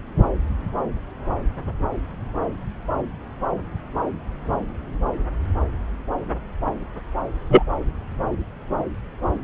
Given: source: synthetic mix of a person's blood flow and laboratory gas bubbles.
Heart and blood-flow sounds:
Doppler ultrasound of blood flow; subclavian vein
7.49-7.62 s: bubbles
From the record:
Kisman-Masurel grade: 113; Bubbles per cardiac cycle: 1 to 2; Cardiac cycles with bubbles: 1 to 10%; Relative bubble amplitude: loud (0.450 to 0.775); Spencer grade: 1 (occasional bubble signal discernible with the cardiac motion signal, with majority of cardiac periods free of bubbles); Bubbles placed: anywhere in the cardiac cycle

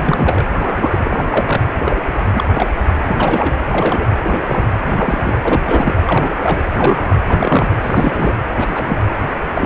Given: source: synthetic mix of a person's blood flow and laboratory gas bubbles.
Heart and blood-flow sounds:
Doppler ultrasound of blood flow; precordium
0.00-0.03 s: bubbles
0.07-0.45 s: bubbles
0.59-1.64 s: bubbles
1.85-1.97 s: bubbles
2.14-2.33 s: bubbles
2.35-2.49 s: bubbles
2.54-2.71 s: bubbles
3.05-3.54 s: bubbles
3.73-4.09 s: bubbles
4.24-4.67 s: bubbles
4.79-5.32 s: bubbles
5.43-5.60 s: bubbles
5.63-5.93 s: bubbles
6.05-6.30 s: bubbles
6.42-6.64 s: bubbles
6.73-7.20 s: bubbles
7.28-7.76 s: bubbles
7.81-8.36 s: bubbles
8.47-8.54 s: bubbles
8.56-9.00 s: bubbles
9.55-9.66 s: bubbles
From the record:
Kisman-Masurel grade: 243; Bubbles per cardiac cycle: several, 3 to 8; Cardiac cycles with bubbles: 100%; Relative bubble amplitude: loud (0.450 to 0.775); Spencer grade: 3 (all of the cardiac periods contain showers or single bubble signals, but not dominating or overriding the cardiac motion signals); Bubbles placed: anywhere in the cardiac cycle

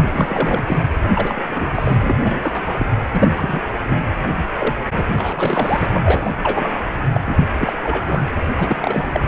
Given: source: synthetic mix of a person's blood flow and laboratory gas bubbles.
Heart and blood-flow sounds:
Doppler ultrasound of blood flow; precordium
0.00-0.64 s: bubbles
0.67-0.81 s: bubbles
1.03-1.11 s: bubbles
1.15-1.43 s: bubbles
1.48-1.71 s: bubbles
1.75-1.96 s: bubbles
2.02-2.16 s: bubbles
2.19-2.87 s: bubbles
3.11-3.61 s: bubbles
3.88-3.97 s: bubbles
4.59-4.74 s: bubbles
4.92-5.86 s: bubbles
5.92-6.00 s: bubbles
6.04-6.33 s: bubbles
6.43-6.75 s: bubbles
7.14-7.21 s: bubbles
7.25-7.45 s: bubbles
7.53-7.74 s: bubbles
7.83-8.24 s: bubbles
8.54-9.10 s: bubbles
9.13-9.21 s: bubbles
From the record:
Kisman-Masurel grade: 342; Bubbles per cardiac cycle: rolling drumbeat, 9 or more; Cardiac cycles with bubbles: 100%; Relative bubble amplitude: moderate (0.250 to 0.450); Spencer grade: 3 (all of the cardiac periods contain showers or single bubble signals, but not dominating or overriding the cardiac motion signals); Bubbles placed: anywhere in the cardiac cycle

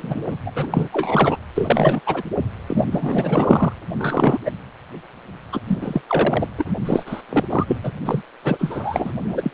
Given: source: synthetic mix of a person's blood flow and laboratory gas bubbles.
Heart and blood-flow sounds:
Doppler ultrasound of blood flow; precordium
0.00-0.23 s: bubbles
0.27-0.36 s: bubbles
0.45-0.51 s: bubbles
0.55-0.89 s: bubbles
0.92-1.37 s: bubbles
1.54-2.01 s: bubbles
2.06-2.22 s: bubbles
2.67-2.85 s: bubbles
2.91-3.72 s: bubbles
3.99-4.38 s: bubbles
4.45-4.51 s: bubbles
5.52-5.60 s: bubbles
5.67-5.78 s: bubbles
5.81-6.01 s: bubbles
6.08-6.48 s: bubbles
6.58-6.71 s: bubbles
6.85-7.03 s: bubbles
7.05-7.22 s: bubbles
7.29-7.44 s: bubbles
7.50-7.77 s: bubbles
7.82-7.92 s: bubbles
8.05-8.23 s: bubbles
8.44-9.12 s: bubbles
9.18-9.51 s: bubbles
From the record:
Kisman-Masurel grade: 343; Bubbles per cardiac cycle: rolling drumbeat, 9 or more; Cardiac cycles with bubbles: 100%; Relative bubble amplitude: loud (0.450 to 0.775); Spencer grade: 3 (all of the cardiac periods contain showers or single bubble signals, but not dominating or overriding the cardiac motion signals); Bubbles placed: anywhere in the cardiac cycle

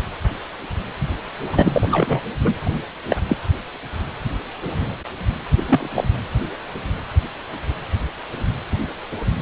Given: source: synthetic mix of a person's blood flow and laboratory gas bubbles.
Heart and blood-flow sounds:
Doppler ultrasound of blood flow; precordium
1.52-2.21 s: bubbles
2.44-2.54 s: bubbles
3.09-3.16 s: bubbles
3.28-3.36 s: bubbles
5.56-5.63 s: bubbles
5.67-5.89 s: bubbles
5.95-6.04 s: bubbles
From the record:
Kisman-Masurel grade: 223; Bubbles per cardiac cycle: several, 3 to 8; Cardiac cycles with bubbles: 10 to 50%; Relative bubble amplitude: loud (0.450 to 0.775); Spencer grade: 2 (many but less than half of the cardiac periods contain bubble signals, singularly or in groups); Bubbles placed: anywhere in the cardiac cycle

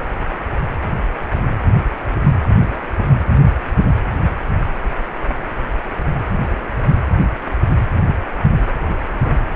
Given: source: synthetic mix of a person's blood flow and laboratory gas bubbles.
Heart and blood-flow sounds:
Doppler ultrasound of blood flow; precordium
9.07-9.38 s: bubbles
From the record:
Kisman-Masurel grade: 111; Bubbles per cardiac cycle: 1 to 2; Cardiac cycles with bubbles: 1 to 10%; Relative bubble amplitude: barely perceptible (0.100 to 0.250); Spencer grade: 1 (occasional bubble signal discernible with the cardiac motion signal, with majority of cardiac periods free of bubbles); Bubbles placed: anywhere in the cardiac cycle

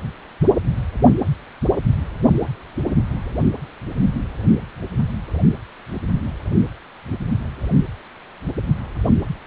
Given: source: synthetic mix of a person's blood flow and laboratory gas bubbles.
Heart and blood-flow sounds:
Doppler ultrasound of blood flow; precordium
no bubbles
From the record:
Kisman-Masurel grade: 000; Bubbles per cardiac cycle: 0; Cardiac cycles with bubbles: 0%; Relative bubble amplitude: no bubbles discernible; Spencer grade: 0 (complete lack of bubble signals)

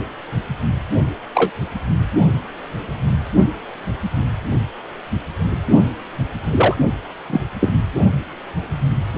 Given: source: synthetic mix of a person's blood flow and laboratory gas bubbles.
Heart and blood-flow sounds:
Doppler ultrasound of blood flow; precordium
0.00-0.02 s: bubbles
1.35-1.50 s: bubbles
6.51-6.75 s: bubbles
7.29-7.41 s: bubbles
7.61-7.72 s: bubbles
From the record:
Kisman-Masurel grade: 123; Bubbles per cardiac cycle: 1 to 2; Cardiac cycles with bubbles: 10 to 50%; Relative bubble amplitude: loud (0.450 to 0.775); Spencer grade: 2 (many but less than half of the cardiac periods contain bubble signals, singularly or in groups); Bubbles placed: only in the low amplitude regions of the cardiac cycle

